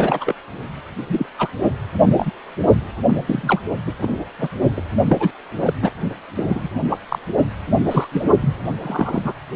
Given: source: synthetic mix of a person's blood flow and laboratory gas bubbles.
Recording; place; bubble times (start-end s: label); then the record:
Doppler ultrasound of blood flow; precordium
0.00-0.34 s: bubbles
1.10-1.26 s: bubbles
1.39-1.48 s: bubbles
2.03-2.30 s: bubbles
3.07-3.23 s: bubbles
3.27-3.61 s: bubbles
3.86-3.92 s: bubbles
4.02-4.16 s: bubbles
4.39-4.48 s: bubbles
4.76-4.81 s: bubbles
5.08-5.31 s: bubbles
5.65-5.73 s: bubbles
5.82-5.91 s: bubbles
6.35-6.70 s: bubbles
6.90-6.98 s: bubbles
7.08-7.19 s: bubbles
7.91-8.08 s: bubbles
8.12-8.26 s: bubbles
8.41-8.54 s: bubbles
8.80-9.34 s: bubbles
From the record:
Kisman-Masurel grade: 242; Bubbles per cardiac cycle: several, 3 to 8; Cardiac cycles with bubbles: 100%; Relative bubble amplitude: moderate (0.250 to 0.450); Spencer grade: 3 (all of the cardiac periods contain showers or single bubble signals, but not dominating or overriding the cardiac motion signals); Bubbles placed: only in the low amplitude regions of the cardiac cycle